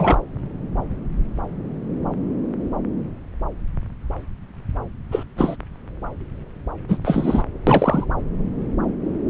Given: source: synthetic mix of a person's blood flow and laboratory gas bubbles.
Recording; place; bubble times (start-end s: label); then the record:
Doppler ultrasound of blood flow; subclavian vein
0.00-0.18 s: bubbles
5.11-5.24 s: bubbles
5.38-5.56 s: bubbles
6.88-6.97 s: bubbles
7.04-7.43 s: bubbles
7.67-8.06 s: bubbles
From the record:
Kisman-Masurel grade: 223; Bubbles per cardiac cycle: several, 3 to 8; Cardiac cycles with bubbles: 10 to 50%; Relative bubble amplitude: loud (0.450 to 0.775); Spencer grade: 2 (many but less than half of the cardiac periods contain bubble signals, singularly or in groups); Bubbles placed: anywhere in the cardiac cycle